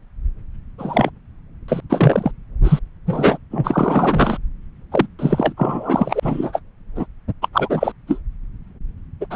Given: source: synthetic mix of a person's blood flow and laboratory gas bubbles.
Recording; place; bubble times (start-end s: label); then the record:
Doppler ultrasound of blood flow; subclavian vein
0.78-1.10 s: bubbles
1.68-1.80 s: bubbles
1.89-2.32 s: bubbles
2.64-2.79 s: bubbles
3.06-3.38 s: bubbles
3.50-4.38 s: bubbles
4.92-5.07 s: bubbles
5.18-5.54 s: bubbles
5.57-6.60 s: bubbles
6.96-7.06 s: bubbles
7.42-7.48 s: bubbles
7.53-7.92 s: bubbles
8.07-8.19 s: bubbles
9.21-9.27 s: bubbles
9.30-9.36 s: bubbles
From the record:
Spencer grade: 3 (all of the cardiac periods contain showers or single bubble signals, but not dominating or overriding the cardiac motion signals); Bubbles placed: anywhere in the cardiac cycle